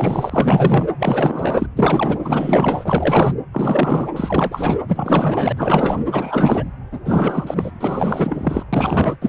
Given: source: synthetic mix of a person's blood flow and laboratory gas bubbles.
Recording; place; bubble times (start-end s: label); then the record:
Doppler ultrasound of blood flow; precordium
0.00-0.86 s: bubbles
0.99-1.67 s: bubbles
1.75-2.19 s: bubbles
2.23-3.34 s: bubbles
3.52-4.07 s: bubbles
4.16-4.78 s: bubbles
4.88-5.53 s: bubbles
5.57-5.99 s: bubbles
6.11-6.65 s: bubbles
6.91-7.00 s: bubbles
7.05-7.71 s: bubbles
7.80-8.63 s: bubbles
8.72-9.17 s: bubbles
9.21-9.28 s: bubbles
From the record:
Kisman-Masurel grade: 444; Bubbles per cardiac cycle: continuous sound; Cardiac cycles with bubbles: 100%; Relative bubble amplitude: maximal (0.775 to 0.999); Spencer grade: 4 (maximum detectable bubble signal sounding continuously throughout systole and diastole of every cardiac period, and overriding the amplitude of the normal cardiac signals); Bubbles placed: anywhere in the cardiac cycle